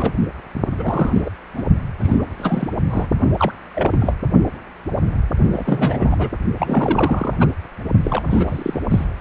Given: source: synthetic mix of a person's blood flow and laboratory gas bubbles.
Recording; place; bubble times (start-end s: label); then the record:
Doppler ultrasound of blood flow; precordium
0.00-0.12 s: bubbles
0.78-1.31 s: bubbles
1.57-1.62 s: bubbles
2.00-2.25 s: bubbles
2.38-2.69 s: bubbles
2.90-3.10 s: bubbles
3.38-3.52 s: bubbles
3.74-4.13 s: bubbles
5.51-6.29 s: bubbles
6.58-7.36 s: bubbles
7.39-7.47 s: bubbles
8.03-8.81 s: bubbles
8.90-9.04 s: bubbles
From the record:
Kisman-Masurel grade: 332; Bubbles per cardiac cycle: rolling drumbeat, 9 or more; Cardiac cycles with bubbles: 50 to 99%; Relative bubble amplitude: moderate (0.250 to 0.450); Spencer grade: 3 (all of the cardiac periods contain showers or single bubble signals, but not dominating or overriding the cardiac motion signals); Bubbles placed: only in the low amplitude regions of the cardiac cycle